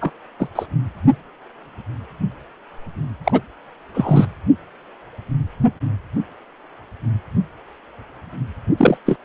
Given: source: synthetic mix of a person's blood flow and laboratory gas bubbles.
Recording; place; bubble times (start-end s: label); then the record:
Doppler ultrasound of blood flow; precordium
0.01-0.11 s: bubbles
0.39-0.48 s: bubbles
0.55-0.66 s: bubbles
3.24-3.41 s: bubbles
3.94-4.28 s: bubbles
8.77-8.98 s: bubbles
9.05-9.16 s: bubbles
From the record:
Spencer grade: 2 (many but less than half of the cardiac periods contain bubble signals, singularly or in groups); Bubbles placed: only in the low amplitude regions of the cardiac cycle